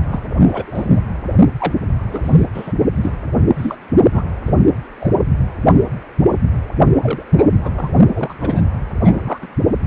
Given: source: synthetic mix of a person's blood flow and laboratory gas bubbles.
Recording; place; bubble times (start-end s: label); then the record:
Doppler ultrasound of blood flow; precordium
0.11-0.20 s: bubbles
0.37-1.00 s: bubbles
1.58-1.74 s: bubbles
2.12-2.47 s: bubbles
2.54-2.73 s: bubbles
3.01-3.12 s: bubbles
3.58-3.77 s: bubbles
4.12-4.24 s: bubbles
4.45-4.54 s: bubbles
5.00-5.11 s: bubbles
7.02-7.23 s: bubbles
7.38-7.45 s: bubbles
7.63-7.71 s: bubbles
7.75-7.91 s: bubbles
8.13-8.34 s: bubbles
8.39-8.62 s: bubbles
9.04-9.38 s: bubbles
9.42-9.47 s: bubbles
From the record:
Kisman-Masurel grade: 233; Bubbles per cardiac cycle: several, 3 to 8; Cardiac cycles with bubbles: 50 to 99%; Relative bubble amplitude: loud (0.450 to 0.775); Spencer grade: 3 (all of the cardiac periods contain showers or single bubble signals, but not dominating or overriding the cardiac motion signals); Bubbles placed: only in the low amplitude regions of the cardiac cycle